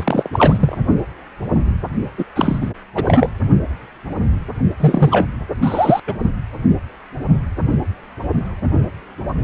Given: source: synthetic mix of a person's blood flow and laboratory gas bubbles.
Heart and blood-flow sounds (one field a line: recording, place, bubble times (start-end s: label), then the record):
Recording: Doppler ultrasound of blood flow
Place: precordium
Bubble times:
0.00-0.28 s: bubbles
0.32-0.78 s: bubbles
2.17-2.24 s: bubbles
2.35-2.70 s: bubbles
2.95-3.29 s: bubbles
4.80-5.28 s: bubbles
5.62-6.00 s: bubbles
6.07-6.14 s: bubbles
From the record:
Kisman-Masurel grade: 333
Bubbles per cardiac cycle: rolling drumbeat, 9 or more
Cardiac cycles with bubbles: 50 to 99%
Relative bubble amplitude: loud (0.450 to 0.775)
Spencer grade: 3 (all of the cardiac periods contain showers or single bubble signals, but not dominating or overriding the cardiac motion signals)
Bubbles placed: only in the low amplitude regions of the cardiac cycle